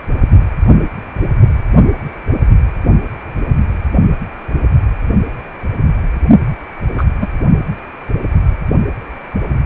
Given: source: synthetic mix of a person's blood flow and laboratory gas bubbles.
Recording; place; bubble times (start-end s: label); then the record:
Doppler ultrasound of blood flow; precordium
6.97-7.04 s: bubbles
7.21-7.27 s: bubbles
From the record:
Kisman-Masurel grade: 113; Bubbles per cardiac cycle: 1 to 2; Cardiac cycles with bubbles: 1 to 10%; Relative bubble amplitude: loud (0.450 to 0.775); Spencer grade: 1 (occasional bubble signal discernible with the cardiac motion signal, with majority of cardiac periods free of bubbles); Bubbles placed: only in the low amplitude regions of the cardiac cycle